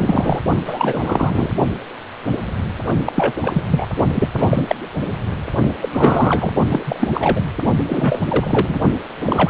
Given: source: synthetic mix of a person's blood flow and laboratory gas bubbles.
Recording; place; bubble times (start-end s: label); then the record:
Doppler ultrasound of blood flow; precordium
0.00-0.41 s: bubbles
0.65-1.51 s: bubbles
3.04-3.33 s: bubbles
3.42-3.63 s: bubbles
3.70-3.88 s: bubbles
4.15-4.29 s: bubbles
4.34-4.75 s: bubbles
5.82-5.89 s: bubbles
5.92-6.53 s: bubbles
6.70-7.41 s: bubbles
7.88-8.22 s: bubbles
8.29-8.79 s: bubbles
9.26-9.50 s: bubbles
From the record:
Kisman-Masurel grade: 333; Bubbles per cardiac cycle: rolling drumbeat, 9 or more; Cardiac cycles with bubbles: 50 to 99%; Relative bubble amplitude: loud (0.450 to 0.775); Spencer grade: 3 (all of the cardiac periods contain showers or single bubble signals, but not dominating or overriding the cardiac motion signals); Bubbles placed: only in the low amplitude regions of the cardiac cycle